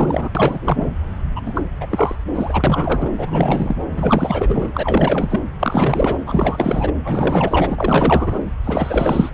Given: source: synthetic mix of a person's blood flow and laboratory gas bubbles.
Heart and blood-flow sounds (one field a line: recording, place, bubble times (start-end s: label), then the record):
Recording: Doppler ultrasound of blood flow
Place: subclavian vein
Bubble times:
0.00-0.30 s: bubbles
0.35-0.92 s: bubbles
1.35-1.42 s: bubbles
1.46-1.64 s: bubbles
1.80-1.86 s: bubbles
1.89-2.16 s: bubbles
2.34-3.10 s: bubbles
3.17-3.76 s: bubbles
3.93-4.71 s: bubbles
4.74-5.40 s: bubbles
5.59-6.18 s: bubbles
6.25-6.92 s: bubbles
7.04-8.39 s: bubbles
8.64-9.29 s: bubbles
From the record:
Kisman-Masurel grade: 444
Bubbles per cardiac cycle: continuous sound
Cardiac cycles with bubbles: 100%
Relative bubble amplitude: maximal (0.775 to 0.999)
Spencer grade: 4 (maximum detectable bubble signal sounding continuously throughout systole and diastole of every cardiac period, and overriding the amplitude of the normal cardiac signals)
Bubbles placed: anywhere in the cardiac cycle